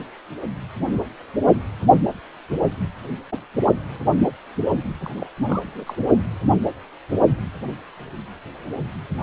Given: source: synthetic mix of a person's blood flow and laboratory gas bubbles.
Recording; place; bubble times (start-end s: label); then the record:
Doppler ultrasound of blood flow; precordium
5.00-5.25 s: bubbles
5.45-5.95 s: bubbles
From the record:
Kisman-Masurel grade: 211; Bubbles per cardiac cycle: several, 3 to 8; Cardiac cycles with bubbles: 1 to 10%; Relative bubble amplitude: barely perceptible (0.100 to 0.250); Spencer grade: 1 (occasional bubble signal discernible with the cardiac motion signal, with majority of cardiac periods free of bubbles); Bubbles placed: only in the low amplitude regions of the cardiac cycle